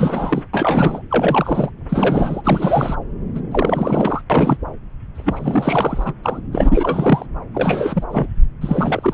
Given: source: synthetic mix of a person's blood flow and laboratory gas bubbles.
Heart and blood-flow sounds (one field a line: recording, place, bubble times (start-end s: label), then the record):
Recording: Doppler ultrasound of blood flow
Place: subclavian vein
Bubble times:
0.00-0.42 s: bubbles
0.53-1.02 s: bubbles
1.10-1.70 s: bubbles
1.89-2.95 s: bubbles
3.35-3.40 s: bubbles
3.51-4.21 s: bubbles
4.29-4.58 s: bubbles
5.15-6.13 s: bubbles
6.23-6.41 s: bubbles
6.52-7.26 s: bubbles
7.54-8.04 s: bubbles
8.10-8.35 s: bubbles
8.61-9.14 s: bubbles
From the record:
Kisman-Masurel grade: 332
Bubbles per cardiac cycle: rolling drumbeat, 9 or more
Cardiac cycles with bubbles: 50 to 99%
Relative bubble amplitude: moderate (0.250 to 0.450)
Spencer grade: 3 (all of the cardiac periods contain showers or single bubble signals, but not dominating or overriding the cardiac motion signals)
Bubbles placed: anywhere in the cardiac cycle